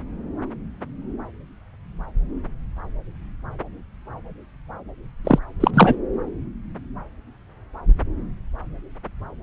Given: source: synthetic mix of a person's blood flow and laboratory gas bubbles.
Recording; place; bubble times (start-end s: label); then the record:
Doppler ultrasound of blood flow; subclavian vein
5.25-5.39 s: bubbles
5.60-5.71 s: bubbles
5.74-5.96 s: bubbles
From the record:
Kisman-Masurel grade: 223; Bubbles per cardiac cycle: several, 3 to 8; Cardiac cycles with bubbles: 10 to 50%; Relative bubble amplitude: loud (0.450 to 0.775); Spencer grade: 2 (many but less than half of the cardiac periods contain bubble signals, singularly or in groups); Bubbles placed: anywhere in the cardiac cycle